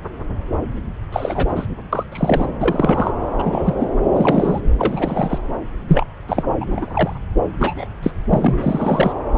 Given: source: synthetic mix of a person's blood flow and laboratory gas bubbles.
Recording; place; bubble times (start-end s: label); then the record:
Doppler ultrasound of blood flow; subclavian vein
1.12-1.67 s: bubbles
1.93-2.04 s: bubbles
2.11-2.46 s: bubbles
2.60-3.12 s: bubbles
3.38-3.74 s: bubbles
3.77-3.89 s: bubbles
4.13-4.61 s: bubbles
4.78-5.39 s: bubbles
5.88-6.07 s: bubbles
6.28-6.44 s: bubbles
6.60-7.17 s: bubbles
7.60-7.87 s: bubbles
8.03-8.11 s: bubbles
8.30-9.12 s: bubbles
From the record:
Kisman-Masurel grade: 243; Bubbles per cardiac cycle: several, 3 to 8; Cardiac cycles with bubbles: 100%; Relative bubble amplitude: loud (0.450 to 0.775); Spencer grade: 3 (all of the cardiac periods contain showers or single bubble signals, but not dominating or overriding the cardiac motion signals); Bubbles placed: anywhere in the cardiac cycle